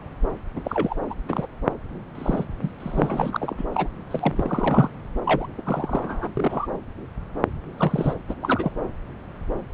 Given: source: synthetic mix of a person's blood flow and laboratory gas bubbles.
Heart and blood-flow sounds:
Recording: Doppler ultrasound of blood flow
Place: subclavian vein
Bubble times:
0.55-0.61 s: bubbles
0.64-0.96 s: bubbles
1.09-1.14 s: bubbles
1.27-1.47 s: bubbles
2.15-2.45 s: bubbles
2.62-2.71 s: bubbles
2.80-3.65 s: bubbles
3.72-3.87 s: bubbles
4.11-4.90 s: bubbles
5.25-5.47 s: bubbles
5.57-5.62 s: bubbles
5.64-6.29 s: bubbles
6.37-6.67 s: bubbles
7.78-8.14 s: bubbles
8.29-8.35 s: bubbles
8.42-8.71 s: bubbles
From the record:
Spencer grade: 3 (all of the cardiac periods contain showers or single bubble signals, but not dominating or overriding the cardiac motion signals)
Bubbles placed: anywhere in the cardiac cycle

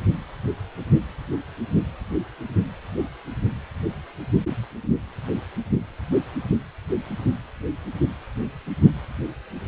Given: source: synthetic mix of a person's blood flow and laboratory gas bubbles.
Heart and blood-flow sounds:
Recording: Doppler ultrasound of blood flow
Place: precordium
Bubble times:
no bubbles
From the record:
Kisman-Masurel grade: 000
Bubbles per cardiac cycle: 0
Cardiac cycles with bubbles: 0%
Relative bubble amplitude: no bubbles discernible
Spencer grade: 0 (complete lack of bubble signals)

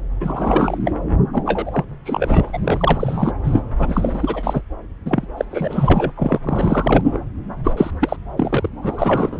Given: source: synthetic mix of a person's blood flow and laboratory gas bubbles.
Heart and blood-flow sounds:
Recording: Doppler ultrasound of blood flow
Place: subclavian vein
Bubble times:
0.20-0.78 s: bubbles
0.84-0.92 s: bubbles
1.32-1.84 s: bubbles
2.05-2.58 s: bubbles
2.63-3.32 s: bubbles
3.44-3.62 s: bubbles
3.78-4.62 s: bubbles
5.05-5.26 s: bubbles
5.37-5.45 s: bubbles
5.51-6.11 s: bubbles
6.17-6.39 s: bubbles
6.44-7.19 s: bubbles
7.64-7.74 s: bubbles
7.76-7.91 s: bubbles
8.00-8.16 s: bubbles
8.37-8.70 s: bubbles
8.83-9.40 s: bubbles
From the record:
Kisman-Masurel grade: 343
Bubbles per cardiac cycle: rolling drumbeat, 9 or more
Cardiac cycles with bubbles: 100%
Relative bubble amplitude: loud (0.450 to 0.775)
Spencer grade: 3 (all of the cardiac periods contain showers or single bubble signals, but not dominating or overriding the cardiac motion signals)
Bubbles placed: anywhere in the cardiac cycle

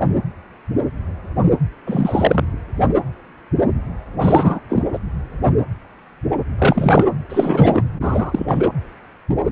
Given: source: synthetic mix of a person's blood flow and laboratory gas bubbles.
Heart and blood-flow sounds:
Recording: Doppler ultrasound of blood flow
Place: precordium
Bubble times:
1.86-2.47 s: bubbles
4.21-4.60 s: bubbles
4.69-4.85 s: bubbles
4.92-4.99 s: bubbles
6.58-7.05 s: bubbles
7.29-7.83 s: bubbles
8.01-8.68 s: bubbles
From the record:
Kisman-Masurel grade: 223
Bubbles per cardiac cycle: several, 3 to 8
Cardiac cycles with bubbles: 10 to 50%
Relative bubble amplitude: loud (0.450 to 0.775)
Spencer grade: 2 (many but less than half of the cardiac periods contain bubble signals, singularly or in groups)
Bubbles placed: anywhere in the cardiac cycle

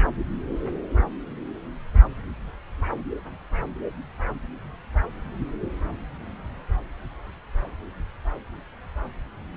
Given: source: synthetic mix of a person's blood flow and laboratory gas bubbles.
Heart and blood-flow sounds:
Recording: Doppler ultrasound of blood flow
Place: subclavian vein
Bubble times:
no bubbles
From the record:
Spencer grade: 0 (complete lack of bubble signals)

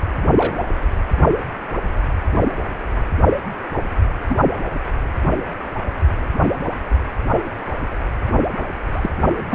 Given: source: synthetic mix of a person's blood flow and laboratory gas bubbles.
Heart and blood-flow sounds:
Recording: Doppler ultrasound of blood flow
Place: precordium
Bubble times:
0.31-0.58 s: bubbles
4.29-4.38 s: bubbles
8.92-9.11 s: bubbles
9.36-9.54 s: bubbles
From the record:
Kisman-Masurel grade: 122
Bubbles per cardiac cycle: 1 to 2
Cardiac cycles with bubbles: 10 to 50%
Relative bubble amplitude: moderate (0.250 to 0.450)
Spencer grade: 2 (many but less than half of the cardiac periods contain bubble signals, singularly or in groups)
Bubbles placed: anywhere in the cardiac cycle

